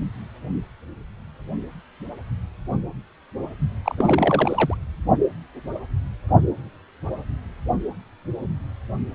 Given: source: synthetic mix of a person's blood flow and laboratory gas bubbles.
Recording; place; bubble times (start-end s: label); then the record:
Doppler ultrasound of blood flow; precordium
3.85-3.95 s: bubbles
3.97-4.76 s: bubbles
From the record:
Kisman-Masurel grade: 212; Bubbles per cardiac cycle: several, 3 to 8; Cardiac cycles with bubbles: 1 to 10%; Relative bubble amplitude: moderate (0.250 to 0.450); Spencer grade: 1 (occasional bubble signal discernible with the cardiac motion signal, with majority of cardiac periods free of bubbles); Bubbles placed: anywhere in the cardiac cycle